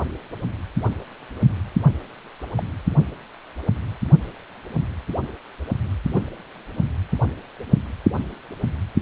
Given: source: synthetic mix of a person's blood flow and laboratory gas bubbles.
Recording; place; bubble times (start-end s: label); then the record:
Doppler ultrasound of blood flow; precordium
2.58-2.63 s: bubbles
6.13-6.23 s: bubbles
From the record:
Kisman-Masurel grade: 121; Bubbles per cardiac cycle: 1 to 2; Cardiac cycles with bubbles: 10 to 50%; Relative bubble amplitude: barely perceptible (0.100 to 0.250); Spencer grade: 2 (many but less than half of the cardiac periods contain bubble signals, singularly or in groups); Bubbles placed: only in the low amplitude regions of the cardiac cycle